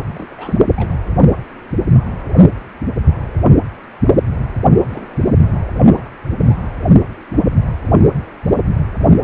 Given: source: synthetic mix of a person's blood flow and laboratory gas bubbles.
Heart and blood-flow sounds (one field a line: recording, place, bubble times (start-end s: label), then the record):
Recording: Doppler ultrasound of blood flow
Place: precordium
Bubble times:
0.15-0.57 s: bubbles
0.76-0.96 s: bubbles
4.75-4.85 s: bubbles
4.90-5.08 s: bubbles
5.20-5.29 s: bubbles
5.40-5.59 s: bubbles
5.81-6.09 s: bubbles
6.41-6.61 s: bubbles
9.14-9.24 s: bubbles
From the record:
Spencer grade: 2 (many but less than half of the cardiac periods contain bubble signals, singularly or in groups)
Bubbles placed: anywhere in the cardiac cycle